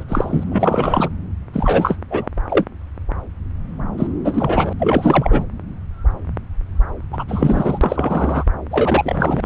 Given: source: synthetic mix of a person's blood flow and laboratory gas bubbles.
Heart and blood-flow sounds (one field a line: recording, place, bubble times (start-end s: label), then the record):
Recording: Doppler ultrasound of blood flow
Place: subclavian vein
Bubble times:
0.00-0.04 s: bubbles
0.08-0.43 s: bubbles
0.50-1.08 s: bubbles
1.53-1.97 s: bubbles
2.10-2.29 s: bubbles
2.49-2.65 s: bubbles
3.97-4.07 s: bubbles
4.24-4.73 s: bubbles
4.79-5.44 s: bubbles
7.12-7.24 s: bubbles
7.28-7.78 s: bubbles
7.82-8.44 s: bubbles
8.71-9.46 s: bubbles
From the record:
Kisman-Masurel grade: 333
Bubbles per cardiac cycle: rolling drumbeat, 9 or more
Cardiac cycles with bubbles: 50 to 99%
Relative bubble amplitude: loud (0.450 to 0.775)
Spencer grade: 3 (all of the cardiac periods contain showers or single bubble signals, but not dominating or overriding the cardiac motion signals)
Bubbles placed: anywhere in the cardiac cycle